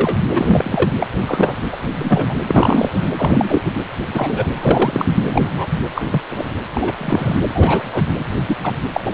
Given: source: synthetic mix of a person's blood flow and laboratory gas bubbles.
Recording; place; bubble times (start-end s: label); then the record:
Doppler ultrasound of blood flow; precordium
0.00-0.17 s: bubbles
0.34-0.90 s: bubbles
1.01-1.07 s: bubbles
1.21-1.54 s: bubbles
1.72-1.76 s: bubbles
1.95-2.34 s: bubbles
2.47-3.12 s: bubbles
3.17-3.61 s: bubbles
3.65-3.71 s: bubbles
4.14-4.48 s: bubbles
4.57-5.14 s: bubbles
5.24-5.68 s: bubbles
5.95-6.21 s: bubbles
6.29-6.50 s: bubbles
6.74-7.39 s: bubbles
7.54-7.83 s: bubbles
7.88-8.03 s: bubbles
8.19-8.24 s: bubbles
8.47-8.57 s: bubbles
8.63-8.76 s: bubbles
8.93-9.01 s: bubbles
9.04-9.14 s: bubbles
From the record:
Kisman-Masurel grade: 243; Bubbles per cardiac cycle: several, 3 to 8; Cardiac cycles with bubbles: 100%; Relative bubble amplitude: loud (0.450 to 0.775); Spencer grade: 3 (all of the cardiac periods contain showers or single bubble signals, but not dominating or overriding the cardiac motion signals); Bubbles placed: anywhere in the cardiac cycle